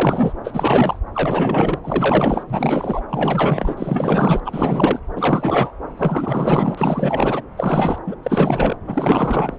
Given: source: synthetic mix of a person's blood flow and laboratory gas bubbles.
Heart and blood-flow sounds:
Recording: Doppler ultrasound of blood flow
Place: subclavian vein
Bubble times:
0.00-0.33 s: bubbles
0.44-0.99 s: bubbles
1.14-1.79 s: bubbles
1.83-2.44 s: bubbles
2.48-3.02 s: bubbles
3.09-4.40 s: bubbles
4.45-5.00 s: bubbles
5.16-5.72 s: bubbles
5.97-7.42 s: bubbles
7.57-7.98 s: bubbles
8.06-8.15 s: bubbles
8.22-8.77 s: bubbles
8.87-9.59 s: bubbles
From the record:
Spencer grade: 4 (maximum detectable bubble signal sounding continuously throughout systole and diastole of every cardiac period, and overriding the amplitude of the normal cardiac signals)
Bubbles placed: anywhere in the cardiac cycle

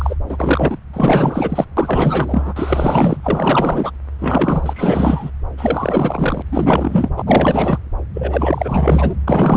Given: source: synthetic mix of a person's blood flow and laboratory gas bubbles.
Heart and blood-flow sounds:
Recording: Doppler ultrasound of blood flow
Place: subclavian vein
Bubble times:
0.00-0.16 s: bubbles
0.28-0.79 s: bubbles
0.93-1.66 s: bubbles
1.77-2.53 s: bubbles
2.56-3.90 s: bubbles
4.18-5.30 s: bubbles
5.57-6.42 s: bubbles
6.51-7.09 s: bubbles
7.17-7.79 s: bubbles
8.14-9.15 s: bubbles
9.28-9.57 s: bubbles
From the record:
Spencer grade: 4 (maximum detectable bubble signal sounding continuously throughout systole and diastole of every cardiac period, and overriding the amplitude of the normal cardiac signals)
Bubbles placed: anywhere in the cardiac cycle

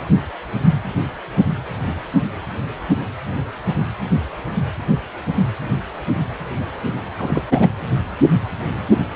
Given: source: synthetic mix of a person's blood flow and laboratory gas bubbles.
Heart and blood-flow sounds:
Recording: Doppler ultrasound of blood flow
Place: precordium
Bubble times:
7.17-7.42 s: bubbles
7.50-7.69 s: bubbles
From the record:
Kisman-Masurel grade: 212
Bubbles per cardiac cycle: several, 3 to 8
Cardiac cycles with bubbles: 1 to 10%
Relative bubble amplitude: moderate (0.250 to 0.450)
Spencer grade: 1 (occasional bubble signal discernible with the cardiac motion signal, with majority of cardiac periods free of bubbles)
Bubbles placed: anywhere in the cardiac cycle

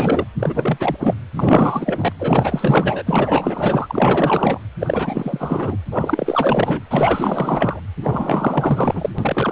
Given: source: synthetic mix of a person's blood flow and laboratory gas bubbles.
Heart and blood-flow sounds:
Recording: Doppler ultrasound of blood flow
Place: precordium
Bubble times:
0.00-0.25 s: bubbles
0.39-0.96 s: bubbles
1.00-1.16 s: bubbles
1.34-2.12 s: bubbles
2.19-3.03 s: bubbles
3.06-4.58 s: bubbles
4.80-5.78 s: bubbles
5.91-6.83 s: bubbles
6.90-7.80 s: bubbles
8.00-9.09 s: bubbles
9.18-9.52 s: bubbles
From the record:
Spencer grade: 4 (maximum detectable bubble signal sounding continuously throughout systole and diastole of every cardiac period, and overriding the amplitude of the normal cardiac signals)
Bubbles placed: anywhere in the cardiac cycle

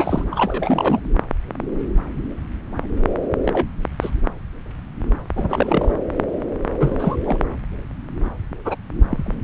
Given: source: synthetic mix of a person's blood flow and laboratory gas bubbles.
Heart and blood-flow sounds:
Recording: Doppler ultrasound of blood flow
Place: subclavian vein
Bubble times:
0.00-0.25 s: bubbles
0.31-1.00 s: bubbles
3.46-3.67 s: bubbles
4.01-4.10 s: bubbles
5.36-5.92 s: bubbles
6.79-7.17 s: bubbles
7.24-7.38 s: bubbles
8.64-8.76 s: bubbles
9.00-9.35 s: bubbles
From the record:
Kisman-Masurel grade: 232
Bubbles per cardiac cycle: several, 3 to 8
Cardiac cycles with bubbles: 50 to 99%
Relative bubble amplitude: moderate (0.250 to 0.450)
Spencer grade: 3 (all of the cardiac periods contain showers or single bubble signals, but not dominating or overriding the cardiac motion signals)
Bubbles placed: anywhere in the cardiac cycle

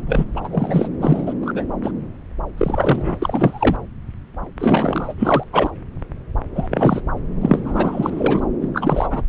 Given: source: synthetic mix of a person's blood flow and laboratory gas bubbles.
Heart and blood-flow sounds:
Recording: Doppler ultrasound of blood flow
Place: subclavian vein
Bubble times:
0.07-0.24 s: bubbles
0.36-0.41 s: bubbles
0.44-0.48 s: bubbles
0.51-0.88 s: bubbles
1.02-1.34 s: bubbles
1.42-1.52 s: bubbles
1.54-1.65 s: bubbles
1.83-1.91 s: bubbles
2.58-3.17 s: bubbles
3.22-3.77 s: bubbles
4.59-5.14 s: bubbles
5.19-5.43 s: bubbles
5.52-5.71 s: bubbles
6.55-6.67 s: bubbles
6.71-7.00 s: bubbles
7.41-7.59 s: bubbles
7.64-8.46 s: bubbles
8.62-8.68 s: bubbles
8.74-9.22 s: bubbles
From the record:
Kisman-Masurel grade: 332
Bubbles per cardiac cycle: rolling drumbeat, 9 or more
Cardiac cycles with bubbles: 50 to 99%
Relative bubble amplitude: moderate (0.250 to 0.450)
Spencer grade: 3 (all of the cardiac periods contain showers or single bubble signals, but not dominating or overriding the cardiac motion signals)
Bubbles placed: anywhere in the cardiac cycle

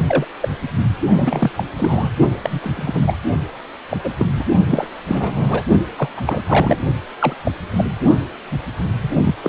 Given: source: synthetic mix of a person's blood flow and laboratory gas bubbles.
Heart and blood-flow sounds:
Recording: Doppler ultrasound of blood flow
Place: precordium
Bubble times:
0.08-0.25 s: bubbles
0.41-0.49 s: bubbles
1.10-1.50 s: bubbles
1.57-1.64 s: bubbles
1.77-2.10 s: bubbles
2.42-3.17 s: bubbles
3.90-3.97 s: bubbles
4.04-4.12 s: bubbles
4.19-4.26 s: bubbles
4.36-4.45 s: bubbles
4.69-4.87 s: bubbles
5.07-5.63 s: bubbles
5.98-6.09 s: bubbles
6.17-6.21 s: bubbles
6.26-6.77 s: bubbles
7.19-7.36 s: bubbles
7.45-7.52 s: bubbles
7.75-7.84 s: bubbles
9.02-9.35 s: bubbles
9.43-9.49 s: bubbles
From the record:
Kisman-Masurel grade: 242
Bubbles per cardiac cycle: several, 3 to 8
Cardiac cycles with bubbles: 100%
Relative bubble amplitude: moderate (0.250 to 0.450)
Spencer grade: 3 (all of the cardiac periods contain showers or single bubble signals, but not dominating or overriding the cardiac motion signals)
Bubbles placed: only in the low amplitude regions of the cardiac cycle

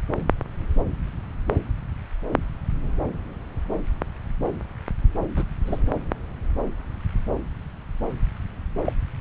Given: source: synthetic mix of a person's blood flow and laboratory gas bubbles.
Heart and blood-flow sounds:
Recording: Doppler ultrasound of blood flow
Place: subclavian vein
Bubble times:
5.36-5.43 s: bubbles
5.66-5.81 s: bubbles
8.85-8.93 s: bubbles
From the record:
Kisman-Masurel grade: 112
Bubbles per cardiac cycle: 1 to 2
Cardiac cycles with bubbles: 1 to 10%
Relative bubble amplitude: moderate (0.250 to 0.450)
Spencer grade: 1 (occasional bubble signal discernible with the cardiac motion signal, with majority of cardiac periods free of bubbles)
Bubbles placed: anywhere in the cardiac cycle

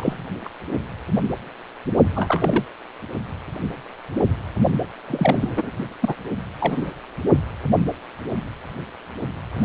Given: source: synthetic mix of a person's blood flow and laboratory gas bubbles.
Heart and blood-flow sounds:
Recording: Doppler ultrasound of blood flow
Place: precordium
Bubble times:
0.00-0.24 s: bubbles
0.45-0.49 s: bubbles
2.15-2.65 s: bubbles
5.08-5.71 s: bubbles
6.00-6.15 s: bubbles
6.58-6.92 s: bubbles
9.53-9.65 s: bubbles
From the record:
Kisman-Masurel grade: 232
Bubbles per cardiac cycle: several, 3 to 8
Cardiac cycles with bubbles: 50 to 99%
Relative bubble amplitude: moderate (0.250 to 0.450)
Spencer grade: 3 (all of the cardiac periods contain showers or single bubble signals, but not dominating or overriding the cardiac motion signals)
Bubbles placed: only in the low amplitude regions of the cardiac cycle

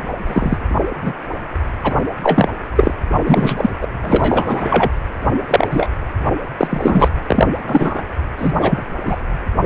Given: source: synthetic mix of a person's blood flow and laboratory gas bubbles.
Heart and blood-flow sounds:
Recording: Doppler ultrasound of blood flow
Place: precordium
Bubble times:
0.27-0.57 s: bubbles
1.01-1.13 s: bubbles
1.83-1.95 s: bubbles
2.23-2.49 s: bubbles
2.75-2.94 s: bubbles
3.25-3.70 s: bubbles
3.81-3.87 s: bubbles
4.04-4.89 s: bubbles
5.47-5.67 s: bubbles
5.70-5.89 s: bubbles
6.58-7.09 s: bubbles
7.26-7.47 s: bubbles
7.67-8.02 s: bubbles
8.38-8.53 s: bubbles
8.60-8.83 s: bubbles
9.06-9.17 s: bubbles
From the record:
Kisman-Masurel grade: 243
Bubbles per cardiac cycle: several, 3 to 8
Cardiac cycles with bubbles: 100%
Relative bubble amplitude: loud (0.450 to 0.775)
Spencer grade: 3 (all of the cardiac periods contain showers or single bubble signals, but not dominating or overriding the cardiac motion signals)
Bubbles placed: anywhere in the cardiac cycle

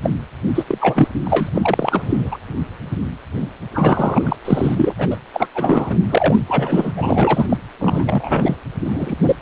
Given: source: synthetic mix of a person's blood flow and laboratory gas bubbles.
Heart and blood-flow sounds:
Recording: Doppler ultrasound of blood flow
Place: precordium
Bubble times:
0.03-0.10 s: bubbles
0.55-0.65 s: bubbles
0.67-0.78 s: bubbles
0.80-1.08 s: bubbles
1.25-1.50 s: bubbles
1.55-2.38 s: bubbles
3.73-4.36 s: bubbles
4.45-4.93 s: bubbles
4.98-5.08 s: bubbles
5.11-5.17 s: bubbles
5.33-5.47 s: bubbles
5.54-5.98 s: bubbles
6.10-6.40 s: bubbles
6.49-6.92 s: bubbles
6.96-7.46 s: bubbles
7.50-7.57 s: bubbles
7.80-8.55 s: bubbles
8.85-9.15 s: bubbles
9.22-9.36 s: bubbles
From the record:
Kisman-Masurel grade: 333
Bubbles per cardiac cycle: rolling drumbeat, 9 or more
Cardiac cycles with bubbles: 50 to 99%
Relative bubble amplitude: loud (0.450 to 0.775)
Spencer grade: 3 (all of the cardiac periods contain showers or single bubble signals, but not dominating or overriding the cardiac motion signals)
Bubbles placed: anywhere in the cardiac cycle

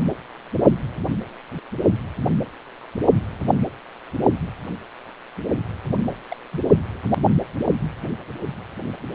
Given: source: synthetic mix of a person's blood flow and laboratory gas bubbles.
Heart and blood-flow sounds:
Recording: Doppler ultrasound of blood flow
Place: precordium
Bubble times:
6.06-6.16 s: bubbles
6.29-6.35 s: bubbles
6.52-6.61 s: bubbles
From the record:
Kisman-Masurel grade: 211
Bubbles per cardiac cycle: several, 3 to 8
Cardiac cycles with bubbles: 1 to 10%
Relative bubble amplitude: barely perceptible (0.100 to 0.250)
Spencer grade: 1 (occasional bubble signal discernible with the cardiac motion signal, with majority of cardiac periods free of bubbles)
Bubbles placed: only in the low amplitude regions of the cardiac cycle

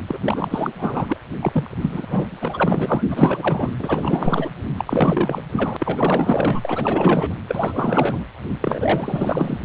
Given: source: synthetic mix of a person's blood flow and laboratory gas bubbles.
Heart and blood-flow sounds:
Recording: Doppler ultrasound of blood flow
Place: precordium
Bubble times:
0.07-0.19 s: bubbles
0.24-1.17 s: bubbles
1.41-1.70 s: bubbles
1.81-2.37 s: bubbles
2.41-3.02 s: bubbles
3.08-3.73 s: bubbles
3.79-4.50 s: bubbles
4.78-5.42 s: bubbles
5.52-5.77 s: bubbles
5.79-6.60 s: bubbles
6.65-7.34 s: bubbles
7.48-8.25 s: bubbles
8.61-9.58 s: bubbles
From the record:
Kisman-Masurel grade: 444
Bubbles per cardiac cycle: continuous sound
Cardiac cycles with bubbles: 100%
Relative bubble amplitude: maximal (0.775 to 0.999)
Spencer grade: 4 (maximum detectable bubble signal sounding continuously throughout systole and diastole of every cardiac period, and overriding the amplitude of the normal cardiac signals)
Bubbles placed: anywhere in the cardiac cycle

